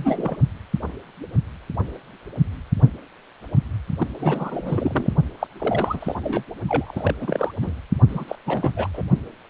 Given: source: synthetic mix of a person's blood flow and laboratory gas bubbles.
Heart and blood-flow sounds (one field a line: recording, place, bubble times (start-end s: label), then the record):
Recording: Doppler ultrasound of blood flow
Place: precordium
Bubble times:
0.00-0.37 s: bubbles
3.98-4.07 s: bubbles
4.19-5.12 s: bubbles
5.39-5.47 s: bubbles
5.59-6.15 s: bubbles
6.23-6.43 s: bubbles
6.68-7.14 s: bubbles
7.20-7.51 s: bubbles
7.62-7.73 s: bubbles
8.09-8.25 s: bubbles
8.28-8.36 s: bubbles
8.46-8.71 s: bubbles
8.76-8.88 s: bubbles
8.94-9.02 s: bubbles
From the record:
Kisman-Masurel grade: 332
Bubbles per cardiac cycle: rolling drumbeat, 9 or more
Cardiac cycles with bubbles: 50 to 99%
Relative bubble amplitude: moderate (0.250 to 0.450)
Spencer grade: 3 (all of the cardiac periods contain showers or single bubble signals, but not dominating or overriding the cardiac motion signals)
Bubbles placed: only in the low amplitude regions of the cardiac cycle